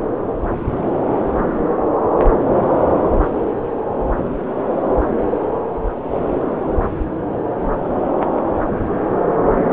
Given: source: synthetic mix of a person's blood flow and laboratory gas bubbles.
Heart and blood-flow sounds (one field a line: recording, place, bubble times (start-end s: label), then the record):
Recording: Doppler ultrasound of blood flow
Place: subclavian vein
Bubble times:
no bubbles
From the record:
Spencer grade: 0 (complete lack of bubble signals)